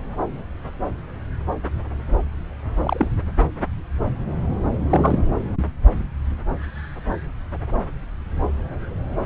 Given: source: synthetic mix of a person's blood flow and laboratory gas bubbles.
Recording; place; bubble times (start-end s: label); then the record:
Doppler ultrasound of blood flow; subclavian vein
2.83-3.09 s: bubbles
4.89-5.18 s: bubbles
From the record:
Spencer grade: 2 (many but less than half of the cardiac periods contain bubble signals, singularly or in groups); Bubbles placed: anywhere in the cardiac cycle